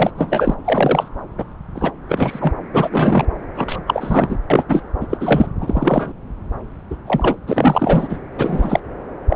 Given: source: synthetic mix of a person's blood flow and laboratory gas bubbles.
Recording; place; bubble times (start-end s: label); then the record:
Doppler ultrasound of blood flow; subclavian vein
0.00-0.11 s: bubbles
0.16-0.54 s: bubbles
0.65-1.08 s: bubbles
1.38-1.44 s: bubbles
1.75-1.91 s: bubbles
2.08-2.53 s: bubbles
2.73-3.25 s: bubbles
3.54-3.80 s: bubbles
3.87-4.38 s: bubbles
4.50-4.63 s: bubbles
4.69-4.82 s: bubbles
5.00-5.07 s: bubbles
5.09-5.17 s: bubbles
5.20-5.46 s: bubbles
5.61-6.12 s: bubbles
6.91-6.96 s: bubbles
7.07-7.36 s: bubbles
7.47-8.18 s: bubbles
8.38-8.79 s: bubbles
9.30-9.36 s: bubbles
From the record:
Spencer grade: 3 (all of the cardiac periods contain showers or single bubble signals, but not dominating or overriding the cardiac motion signals); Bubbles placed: anywhere in the cardiac cycle